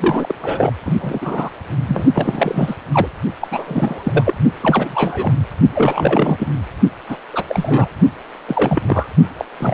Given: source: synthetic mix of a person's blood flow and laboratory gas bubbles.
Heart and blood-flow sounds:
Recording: Doppler ultrasound of blood flow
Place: precordium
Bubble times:
0.00-0.36 s: bubbles
0.41-0.72 s: bubbles
0.85-1.50 s: bubbles
1.88-2.04 s: bubbles
2.14-2.75 s: bubbles
2.92-3.08 s: bubbles
3.41-3.48 s: bubbles
3.51-4.34 s: bubbles
4.62-5.33 s: bubbles
5.74-6.48 s: bubbles
7.08-7.17 s: bubbles
7.33-7.44 s: bubbles
7.47-7.87 s: bubbles
8.47-9.09 s: bubbles
9.38-9.45 s: bubbles
9.59-9.74 s: bubbles
From the record:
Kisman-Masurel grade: 343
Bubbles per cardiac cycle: rolling drumbeat, 9 or more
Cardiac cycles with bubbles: 100%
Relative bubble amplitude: loud (0.450 to 0.775)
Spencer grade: 3 (all of the cardiac periods contain showers or single bubble signals, but not dominating or overriding the cardiac motion signals)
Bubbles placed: only in the low amplitude regions of the cardiac cycle

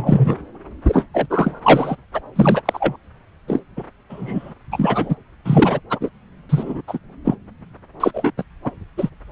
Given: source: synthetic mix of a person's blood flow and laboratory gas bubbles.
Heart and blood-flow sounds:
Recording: Doppler ultrasound of blood flow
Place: subclavian vein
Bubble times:
0.00-0.37 s: bubbles
0.88-1.05 s: bubbles
1.14-1.27 s: bubbles
1.30-1.59 s: bubbles
1.62-1.97 s: bubbles
2.13-2.20 s: bubbles
2.35-2.61 s: bubbles
2.65-2.96 s: bubbles
3.47-3.61 s: bubbles
3.76-3.84 s: bubbles
4.10-4.54 s: bubbles
4.71-5.16 s: bubbles
5.45-5.80 s: bubbles
5.90-6.09 s: bubbles
6.49-6.82 s: bubbles
6.88-6.99 s: bubbles
7.24-7.36 s: bubbles
8.00-8.31 s: bubbles
8.38-8.44 s: bubbles
8.63-8.71 s: bubbles
8.97-9.09 s: bubbles
From the record:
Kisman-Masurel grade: 233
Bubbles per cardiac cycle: several, 3 to 8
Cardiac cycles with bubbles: 50 to 99%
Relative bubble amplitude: loud (0.450 to 0.775)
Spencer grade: 3 (all of the cardiac periods contain showers or single bubble signals, but not dominating or overriding the cardiac motion signals)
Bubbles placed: anywhere in the cardiac cycle

